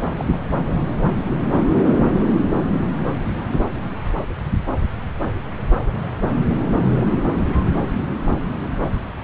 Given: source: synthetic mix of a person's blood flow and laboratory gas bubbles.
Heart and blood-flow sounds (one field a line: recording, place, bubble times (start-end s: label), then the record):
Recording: Doppler ultrasound of blood flow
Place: subclavian vein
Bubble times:
0.18-0.26 s: bubbles
0.32-0.36 s: bubbles
6.96-7.08 s: bubbles
From the record:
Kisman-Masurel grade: 111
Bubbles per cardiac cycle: 1 to 2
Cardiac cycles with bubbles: 1 to 10%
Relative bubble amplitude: barely perceptible (0.100 to 0.250)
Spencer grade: 1 (occasional bubble signal discernible with the cardiac motion signal, with majority of cardiac periods free of bubbles)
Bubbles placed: anywhere in the cardiac cycle